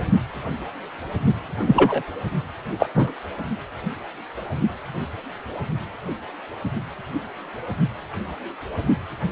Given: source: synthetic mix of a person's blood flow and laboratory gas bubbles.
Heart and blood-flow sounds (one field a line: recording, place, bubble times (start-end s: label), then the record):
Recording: Doppler ultrasound of blood flow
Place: precordium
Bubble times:
1.67-2.02 s: bubbles
2.79-2.86 s: bubbles
2.94-3.13 s: bubbles
From the record:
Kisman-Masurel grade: 123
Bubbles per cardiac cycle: 1 to 2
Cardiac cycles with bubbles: 10 to 50%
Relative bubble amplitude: loud (0.450 to 0.775)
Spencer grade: 2 (many but less than half of the cardiac periods contain bubble signals, singularly or in groups)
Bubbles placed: only in the low amplitude regions of the cardiac cycle